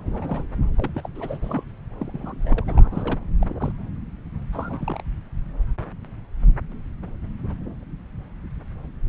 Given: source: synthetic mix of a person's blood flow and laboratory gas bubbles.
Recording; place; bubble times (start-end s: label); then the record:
Doppler ultrasound of blood flow; subclavian vein
0.06-0.43 s: bubbles
0.77-0.91 s: bubbles
0.94-1.08 s: bubbles
1.15-1.38 s: bubbles
1.42-1.64 s: bubbles
2.00-3.19 s: bubbles
3.41-3.46 s: bubbles
3.49-3.54 s: bubbles
3.60-3.72 s: bubbles
4.52-5.02 s: bubbles
From the record:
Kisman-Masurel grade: 221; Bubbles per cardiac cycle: several, 3 to 8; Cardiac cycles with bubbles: 10 to 50%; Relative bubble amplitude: barely perceptible (0.100 to 0.250); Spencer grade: 2 (many but less than half of the cardiac periods contain bubble signals, singularly or in groups); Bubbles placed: anywhere in the cardiac cycle